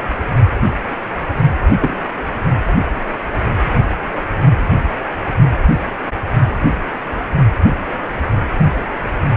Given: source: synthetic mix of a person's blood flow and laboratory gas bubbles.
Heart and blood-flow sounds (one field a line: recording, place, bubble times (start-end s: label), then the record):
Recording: Doppler ultrasound of blood flow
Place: precordium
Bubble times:
1.80-1.94 s: bubbles
From the record:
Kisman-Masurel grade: 112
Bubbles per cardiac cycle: 1 to 2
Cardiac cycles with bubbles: 1 to 10%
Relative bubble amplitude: moderate (0.250 to 0.450)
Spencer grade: 1 (occasional bubble signal discernible with the cardiac motion signal, with majority of cardiac periods free of bubbles)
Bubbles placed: only in the low amplitude regions of the cardiac cycle